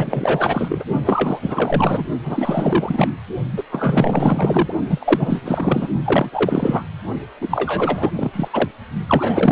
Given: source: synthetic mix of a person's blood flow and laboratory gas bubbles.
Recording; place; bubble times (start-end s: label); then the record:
Doppler ultrasound of blood flow; precordium
0.00-0.84 s: bubbles
1.04-2.08 s: bubbles
2.24-3.13 s: bubbles
3.57-3.63 s: bubbles
3.71-4.73 s: bubbles
4.89-5.88 s: bubbles
6.04-6.29 s: bubbles
6.32-6.83 s: bubbles
7.41-8.11 s: bubbles
8.15-8.48 s: bubbles
8.53-8.69 s: bubbles
9.08-9.52 s: bubbles
From the record:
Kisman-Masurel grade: 444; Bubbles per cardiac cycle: continuous sound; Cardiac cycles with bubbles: 100%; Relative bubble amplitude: maximal (0.775 to 0.999); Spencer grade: 4 (maximum detectable bubble signal sounding continuously throughout systole and diastole of every cardiac period, and overriding the amplitude of the normal cardiac signals); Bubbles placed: only in the low amplitude regions of the cardiac cycle